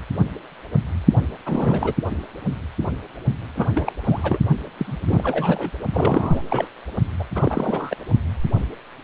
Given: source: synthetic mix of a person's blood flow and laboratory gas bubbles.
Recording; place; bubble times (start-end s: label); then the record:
Doppler ultrasound of blood flow; precordium
1.16-1.23 s: bubbles
1.46-1.94 s: bubbles
3.55-3.67 s: bubbles
3.75-3.92 s: bubbles
4.04-4.38 s: bubbles
4.77-4.97 s: bubbles
5.06-5.71 s: bubbles
5.93-6.42 s: bubbles
6.50-6.67 s: bubbles
7.19-7.25 s: bubbles
7.35-7.96 s: bubbles
From the record:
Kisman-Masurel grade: 332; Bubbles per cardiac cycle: rolling drumbeat, 9 or more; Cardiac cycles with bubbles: 50 to 99%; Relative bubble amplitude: moderate (0.250 to 0.450); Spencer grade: 3 (all of the cardiac periods contain showers or single bubble signals, but not dominating or overriding the cardiac motion signals); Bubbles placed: only in the low amplitude regions of the cardiac cycle